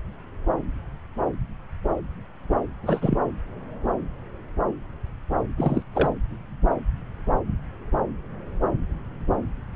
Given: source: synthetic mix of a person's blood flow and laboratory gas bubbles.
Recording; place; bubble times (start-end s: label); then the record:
Doppler ultrasound of blood flow; subclavian vein
2.82-3.19 s: bubbles
5.57-5.83 s: bubbles
5.95-6.09 s: bubbles
From the record:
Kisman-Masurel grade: 222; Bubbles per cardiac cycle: several, 3 to 8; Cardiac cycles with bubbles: 10 to 50%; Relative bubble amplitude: moderate (0.250 to 0.450); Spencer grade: 2 (many but less than half of the cardiac periods contain bubble signals, singularly or in groups); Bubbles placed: anywhere in the cardiac cycle